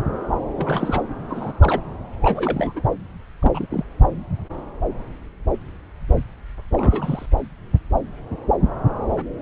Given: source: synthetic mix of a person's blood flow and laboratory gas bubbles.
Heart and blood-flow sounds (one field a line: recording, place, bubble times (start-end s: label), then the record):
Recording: Doppler ultrasound of blood flow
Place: subclavian vein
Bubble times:
0.57-1.02 s: bubbles
1.28-1.52 s: bubbles
1.60-1.81 s: bubbles
2.21-2.83 s: bubbles
3.42-3.66 s: bubbles
3.69-3.85 s: bubbles
6.71-7.26 s: bubbles
From the record:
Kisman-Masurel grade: 222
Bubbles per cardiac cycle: several, 3 to 8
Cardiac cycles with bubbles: 10 to 50%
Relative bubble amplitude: moderate (0.250 to 0.450)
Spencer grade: 2 (many but less than half of the cardiac periods contain bubble signals, singularly or in groups)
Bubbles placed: anywhere in the cardiac cycle